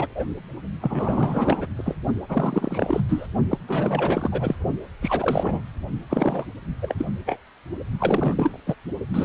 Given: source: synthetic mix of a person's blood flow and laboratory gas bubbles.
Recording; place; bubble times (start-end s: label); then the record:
Doppler ultrasound of blood flow; precordium
0.00-0.08 s: bubbles
0.15-0.24 s: bubbles
0.82-1.67 s: bubbles
1.77-1.95 s: bubbles
2.29-3.01 s: bubbles
3.08-3.26 s: bubbles
3.51-3.58 s: bubbles
3.67-4.55 s: bubbles
5.01-5.61 s: bubbles
6.10-6.46 s: bubbles
6.82-6.94 s: bubbles
6.98-7.05 s: bubbles
7.26-7.36 s: bubbles
8.00-8.60 s: bubbles
8.67-8.75 s: bubbles
9.13-9.25 s: bubbles
From the record:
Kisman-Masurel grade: 342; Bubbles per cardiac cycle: rolling drumbeat, 9 or more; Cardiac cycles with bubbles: 100%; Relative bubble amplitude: moderate (0.250 to 0.450); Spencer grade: 3 (all of the cardiac periods contain showers or single bubble signals, but not dominating or overriding the cardiac motion signals); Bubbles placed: only in the low amplitude regions of the cardiac cycle